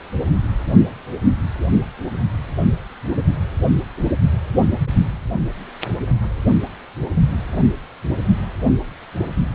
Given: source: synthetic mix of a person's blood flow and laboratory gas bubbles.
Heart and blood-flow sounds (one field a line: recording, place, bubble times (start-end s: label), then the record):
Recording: Doppler ultrasound of blood flow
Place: precordium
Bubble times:
no bubbles
From the record:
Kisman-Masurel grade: 000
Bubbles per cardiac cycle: 0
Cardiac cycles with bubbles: 0%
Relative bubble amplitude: no bubbles discernible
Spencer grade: 0 (complete lack of bubble signals)